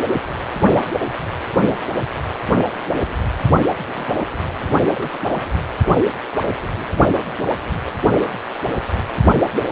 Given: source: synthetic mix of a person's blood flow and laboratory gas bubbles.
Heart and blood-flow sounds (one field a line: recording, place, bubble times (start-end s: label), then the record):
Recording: Doppler ultrasound of blood flow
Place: precordium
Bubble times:
3.87-4.30 s: bubbles
4.94-5.22 s: bubbles
From the record:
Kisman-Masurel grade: 121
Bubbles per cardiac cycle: 1 to 2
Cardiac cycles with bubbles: 10 to 50%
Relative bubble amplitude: barely perceptible (0.100 to 0.250)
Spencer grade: 2 (many but less than half of the cardiac periods contain bubble signals, singularly or in groups)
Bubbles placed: only in the low amplitude regions of the cardiac cycle